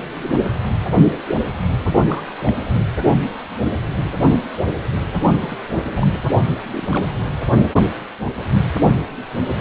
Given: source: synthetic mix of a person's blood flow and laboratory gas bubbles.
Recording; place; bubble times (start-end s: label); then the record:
Doppler ultrasound of blood flow; precordium
2.06-2.23 s: bubbles
2.46-2.53 s: bubbles
2.73-2.81 s: bubbles
5.27-5.58 s: bubbles
5.94-6.21 s: bubbles
6.73-7.08 s: bubbles
From the record:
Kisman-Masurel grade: 221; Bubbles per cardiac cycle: several, 3 to 8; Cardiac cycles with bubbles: 10 to 50%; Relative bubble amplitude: barely perceptible (0.100 to 0.250); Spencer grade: 2 (many but less than half of the cardiac periods contain bubble signals, singularly or in groups); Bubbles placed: anywhere in the cardiac cycle